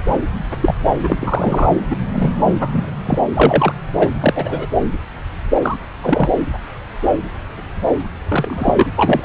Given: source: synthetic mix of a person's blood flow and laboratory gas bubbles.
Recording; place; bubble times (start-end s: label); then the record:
Doppler ultrasound of blood flow; subclavian vein
0.00-0.19 s: bubbles
0.60-0.74 s: bubbles
1.00-1.69 s: bubbles
1.90-1.96 s: bubbles
2.12-2.33 s: bubbles
2.59-2.69 s: bubbles
2.72-2.85 s: bubbles
3.05-3.18 s: bubbles
3.33-3.73 s: bubbles
3.99-4.08 s: bubbles
4.20-4.66 s: bubbles
5.62-5.77 s: bubbles
6.01-6.31 s: bubbles
8.28-8.88 s: bubbles
8.96-9.24 s: bubbles
From the record:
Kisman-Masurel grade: 233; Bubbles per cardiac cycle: several, 3 to 8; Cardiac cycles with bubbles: 50 to 99%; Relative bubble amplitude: loud (0.450 to 0.775); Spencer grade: 3 (all of the cardiac periods contain showers or single bubble signals, but not dominating or overriding the cardiac motion signals); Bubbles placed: anywhere in the cardiac cycle